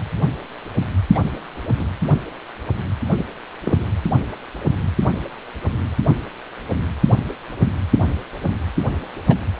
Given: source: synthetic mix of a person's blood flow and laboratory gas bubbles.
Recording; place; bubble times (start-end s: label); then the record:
Doppler ultrasound of blood flow; precordium
1.14-1.19 s: bubbles
1.78-1.84 s: bubbles
3.18-3.25 s: bubbles
3.63-3.78 s: bubbles
9.28-9.36 s: bubbles
From the record:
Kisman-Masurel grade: 122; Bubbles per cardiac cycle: 1 to 2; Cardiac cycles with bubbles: 10 to 50%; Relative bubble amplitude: moderate (0.250 to 0.450); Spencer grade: 2 (many but less than half of the cardiac periods contain bubble signals, singularly or in groups); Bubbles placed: anywhere in the cardiac cycle